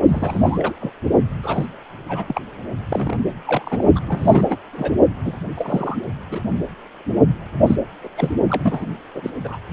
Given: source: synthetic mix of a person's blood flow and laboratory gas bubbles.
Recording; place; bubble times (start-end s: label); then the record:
Doppler ultrasound of blood flow; precordium
0.07-0.74 s: bubbles
0.80-0.92 s: bubbles
1.43-1.66 s: bubbles
2.08-2.25 s: bubbles
2.27-2.42 s: bubbles
2.90-3.25 s: bubbles
3.45-3.84 s: bubbles
3.95-4.00 s: bubbles
4.07-4.57 s: bubbles
4.73-4.92 s: bubbles
5.25-5.36 s: bubbles
5.55-6.01 s: bubbles
6.30-6.42 s: bubbles
7.62-7.76 s: bubbles
8.04-8.09 s: bubbles
8.17-8.31 s: bubbles
8.49-8.89 s: bubbles
9.14-9.21 s: bubbles
9.23-9.30 s: bubbles
9.44-9.58 s: bubbles
From the record:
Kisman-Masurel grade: 242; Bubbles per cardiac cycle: several, 3 to 8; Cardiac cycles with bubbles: 100%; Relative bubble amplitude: moderate (0.250 to 0.450); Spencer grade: 3 (all of the cardiac periods contain showers or single bubble signals, but not dominating or overriding the cardiac motion signals); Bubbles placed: only in the low amplitude regions of the cardiac cycle